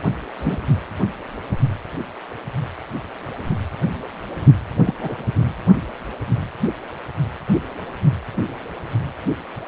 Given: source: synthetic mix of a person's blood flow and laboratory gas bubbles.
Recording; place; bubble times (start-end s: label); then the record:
Doppler ultrasound of blood flow; precordium
0.38-0.58 s: bubbles
4.85-4.94 s: bubbles
5.02-5.23 s: bubbles
From the record:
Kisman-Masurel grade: 122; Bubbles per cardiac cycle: 1 to 2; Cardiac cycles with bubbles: 10 to 50%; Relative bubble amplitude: moderate (0.250 to 0.450); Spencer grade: 2 (many but less than half of the cardiac periods contain bubble signals, singularly or in groups); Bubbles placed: anywhere in the cardiac cycle